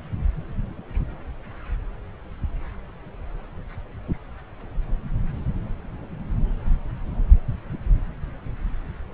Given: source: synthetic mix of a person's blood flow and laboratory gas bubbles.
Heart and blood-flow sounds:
Doppler ultrasound of blood flow; subclavian vein
no bubbles
From the record:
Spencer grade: 0 (complete lack of bubble signals)

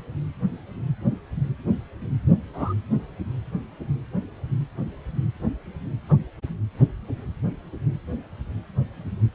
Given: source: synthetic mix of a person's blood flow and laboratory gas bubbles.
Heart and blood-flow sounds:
Doppler ultrasound of blood flow; precordium
2.54-2.74 s: bubbles
6.09-6.17 s: bubbles
From the record:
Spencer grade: 2 (many but less than half of the cardiac periods contain bubble signals, singularly or in groups); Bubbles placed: anywhere in the cardiac cycle

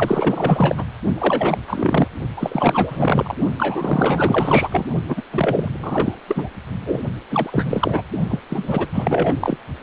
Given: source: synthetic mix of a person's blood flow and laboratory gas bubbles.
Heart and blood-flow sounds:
Doppler ultrasound of blood flow; precordium
0.00-0.84 s: bubbles
1.15-1.57 s: bubbles
1.67-2.08 s: bubbles
2.37-3.35 s: bubbles
3.58-4.85 s: bubbles
5.07-5.21 s: bubbles
5.32-5.69 s: bubbles
5.79-6.15 s: bubbles
6.27-6.49 s: bubbles
6.85-7.02 s: bubbles
7.30-8.02 s: bubbles
8.28-8.39 s: bubbles
8.49-8.87 s: bubbles
8.93-9.35 s: bubbles
9.40-9.58 s: bubbles
From the record:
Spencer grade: 4 (maximum detectable bubble signal sounding continuously throughout systole and diastole of every cardiac period, and overriding the amplitude of the normal cardiac signals); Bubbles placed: only in the low amplitude regions of the cardiac cycle

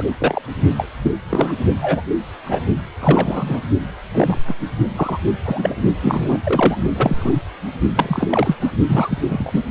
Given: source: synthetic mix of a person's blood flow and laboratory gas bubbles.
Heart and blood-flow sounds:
Doppler ultrasound of blood flow; precordium
0.00-0.03 s: bubbles
0.20-0.42 s: bubbles
0.77-0.86 s: bubbles
1.02-1.11 s: bubbles
1.30-1.53 s: bubbles
1.81-2.01 s: bubbles
2.46-2.60 s: bubbles
3.02-3.60 s: bubbles
4.14-4.38 s: bubbles
4.47-4.54 s: bubbles
4.96-5.18 s: bubbles
5.45-5.76 s: bubbles
6.00-6.38 s: bubbles
6.44-6.78 s: bubbles
6.95-7.34 s: bubbles
7.96-8.56 s: bubbles
8.61-8.72 s: bubbles
8.88-9.19 s: bubbles
9.28-9.63 s: bubbles
From the record:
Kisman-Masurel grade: 243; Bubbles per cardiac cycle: several, 3 to 8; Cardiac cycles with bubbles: 100%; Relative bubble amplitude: loud (0.450 to 0.775); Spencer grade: 3 (all of the cardiac periods contain showers or single bubble signals, but not dominating or overriding the cardiac motion signals); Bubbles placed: only in the low amplitude regions of the cardiac cycle

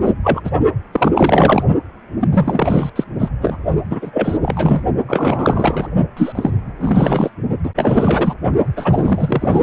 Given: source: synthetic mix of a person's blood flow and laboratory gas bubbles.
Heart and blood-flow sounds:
Doppler ultrasound of blood flow; precordium
0.04-0.14 s: bubbles
0.23-0.41 s: bubbles
0.44-0.51 s: bubbles
0.92-1.11 s: bubbles
1.15-1.63 s: bubbles
2.21-2.27 s: bubbles
2.31-2.90 s: bubbles
2.96-3.04 s: bubbles
3.19-3.28 s: bubbles
3.40-3.57 s: bubbles
3.90-4.38 s: bubbles
4.42-4.83 s: bubbles
5.08-5.88 s: bubbles
6.17-6.33 s: bubbles
6.35-6.50 s: bubbles
6.79-7.30 s: bubbles
7.63-7.71 s: bubbles
7.75-8.34 s: bubbles
8.76-9.63 s: bubbles
From the record:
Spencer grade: 3 (all of the cardiac periods contain showers or single bubble signals, but not dominating or overriding the cardiac motion signals); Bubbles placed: only in the low amplitude regions of the cardiac cycle

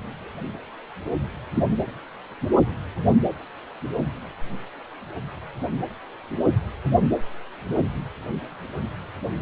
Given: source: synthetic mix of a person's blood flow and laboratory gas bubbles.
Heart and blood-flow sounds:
Doppler ultrasound of blood flow; precordium
1.55-1.64 s: bubbles
From the record:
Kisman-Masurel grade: 112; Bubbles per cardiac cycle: 1 to 2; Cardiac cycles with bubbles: 1 to 10%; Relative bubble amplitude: moderate (0.250 to 0.450); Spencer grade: 1 (occasional bubble signal discernible with the cardiac motion signal, with majority of cardiac periods free of bubbles); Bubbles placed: anywhere in the cardiac cycle

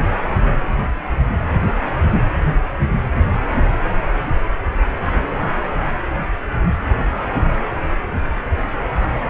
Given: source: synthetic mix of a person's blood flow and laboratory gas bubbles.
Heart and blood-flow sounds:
Doppler ultrasound of blood flow; precordium
no bubbles
From the record:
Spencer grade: 0 (complete lack of bubble signals)

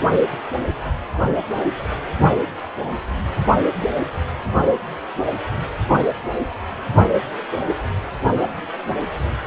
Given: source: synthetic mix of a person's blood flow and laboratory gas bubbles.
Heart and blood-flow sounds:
Doppler ultrasound of blood flow; precordium
no bubbles
From the record:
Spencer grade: 0 (complete lack of bubble signals)

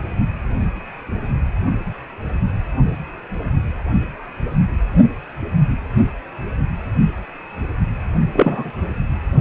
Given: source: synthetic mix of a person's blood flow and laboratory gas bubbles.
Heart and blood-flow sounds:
Doppler ultrasound of blood flow; precordium
8.32-8.71 s: bubbles
From the record:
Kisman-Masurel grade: 213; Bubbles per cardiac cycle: several, 3 to 8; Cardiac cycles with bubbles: 1 to 10%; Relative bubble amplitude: loud (0.450 to 0.775); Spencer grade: 1 (occasional bubble signal discernible with the cardiac motion signal, with majority of cardiac periods free of bubbles); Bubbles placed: only in the low amplitude regions of the cardiac cycle

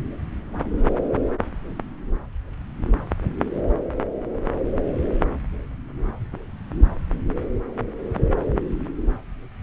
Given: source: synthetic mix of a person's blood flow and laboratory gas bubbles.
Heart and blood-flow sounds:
Doppler ultrasound of blood flow; subclavian vein
no bubbles
From the record:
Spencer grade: 0 (complete lack of bubble signals)

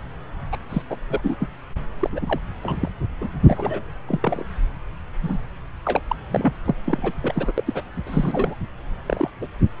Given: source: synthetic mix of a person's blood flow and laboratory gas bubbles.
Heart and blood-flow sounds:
Doppler ultrasound of blood flow; subclavian vein
0.52-0.58 s: bubbles
0.69-0.82 s: bubbles
0.90-0.96 s: bubbles
1.10-1.21 s: bubbles
1.23-1.34 s: bubbles
1.40-1.48 s: bubbles
2.00-2.09 s: bubbles
2.12-2.40 s: bubbles
2.63-2.89 s: bubbles
3.21-3.27 s: bubbles
3.40-3.82 s: bubbles
4.09-4.45 s: bubbles
5.21-5.39 s: bubbles
5.85-6.02 s: bubbles
6.08-6.16 s: bubbles
6.32-6.54 s: bubbles
6.66-6.75 s: bubbles
6.84-7.12 s: bubbles
7.18-7.52 s: bubbles
7.58-7.63 s: bubbles
7.67-7.82 s: bubbles
8.07-8.55 s: bubbles
9.06-9.30 s: bubbles
9.41-9.47 s: bubbles
From the record:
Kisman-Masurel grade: 242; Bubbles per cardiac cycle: several, 3 to 8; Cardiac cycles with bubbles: 100%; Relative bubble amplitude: moderate (0.250 to 0.450); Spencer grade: 3 (all of the cardiac periods contain showers or single bubble signals, but not dominating or overriding the cardiac motion signals); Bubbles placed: anywhere in the cardiac cycle

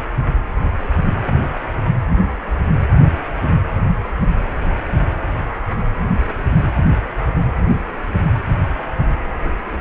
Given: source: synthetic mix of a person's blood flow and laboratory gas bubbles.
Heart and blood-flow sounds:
Doppler ultrasound of blood flow; precordium
no bubbles
From the record:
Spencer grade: 0 (complete lack of bubble signals)

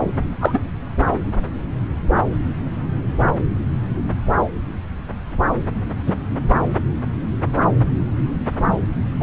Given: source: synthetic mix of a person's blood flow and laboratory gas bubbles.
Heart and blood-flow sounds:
Doppler ultrasound of blood flow; subclavian vein
0.40-0.59 s: bubbles
6.07-6.13 s: bubbles
9.20-9.23 s: bubbles
From the record:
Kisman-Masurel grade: 123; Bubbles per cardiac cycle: 1 to 2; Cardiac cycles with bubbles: 10 to 50%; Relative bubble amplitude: loud (0.450 to 0.775); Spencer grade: 2 (many but less than half of the cardiac periods contain bubble signals, singularly or in groups); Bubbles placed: anywhere in the cardiac cycle

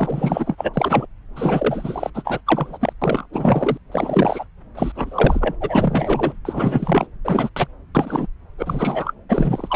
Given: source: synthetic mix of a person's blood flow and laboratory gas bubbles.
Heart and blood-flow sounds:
Doppler ultrasound of blood flow; subclavian vein
0.00-0.55 s: bubbles
0.57-1.06 s: bubbles
1.36-2.10 s: bubbles
2.14-2.40 s: bubbles
2.46-2.77 s: bubbles
2.80-2.93 s: bubbles
3.01-3.26 s: bubbles
3.32-3.77 s: bubbles
3.91-4.45 s: bubbles
4.75-4.92 s: bubbles
4.95-5.55 s: bubbles
5.61-6.33 s: bubbles
6.45-7.07 s: bubbles
7.25-7.49 s: bubbles
7.56-7.67 s: bubbles
7.95-8.27 s: bubbles
8.57-9.13 s: bubbles
9.29-9.76 s: bubbles
From the record:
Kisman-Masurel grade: 343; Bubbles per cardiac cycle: rolling drumbeat, 9 or more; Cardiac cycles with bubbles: 100%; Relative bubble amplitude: loud (0.450 to 0.775); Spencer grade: 3 (all of the cardiac periods contain showers or single bubble signals, but not dominating or overriding the cardiac motion signals); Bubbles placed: anywhere in the cardiac cycle

